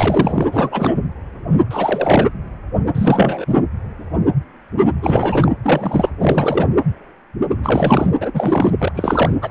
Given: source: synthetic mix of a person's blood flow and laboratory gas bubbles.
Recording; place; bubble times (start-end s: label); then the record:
Doppler ultrasound of blood flow; precordium
0.00-0.46 s: bubbles
0.52-1.00 s: bubbles
1.71-2.27 s: bubbles
2.95-3.45 s: bubbles
3.48-3.56 s: bubbles
5.02-5.51 s: bubbles
5.63-6.09 s: bubbles
6.21-6.67 s: bubbles
7.63-8.11 s: bubbles
8.20-8.72 s: bubbles
8.79-8.92 s: bubbles
8.94-9.38 s: bubbles
9.41-9.51 s: bubbles
From the record:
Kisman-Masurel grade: 332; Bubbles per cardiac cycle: rolling drumbeat, 9 or more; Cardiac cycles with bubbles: 50 to 99%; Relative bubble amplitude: moderate (0.250 to 0.450); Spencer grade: 3 (all of the cardiac periods contain showers or single bubble signals, but not dominating or overriding the cardiac motion signals); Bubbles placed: anywhere in the cardiac cycle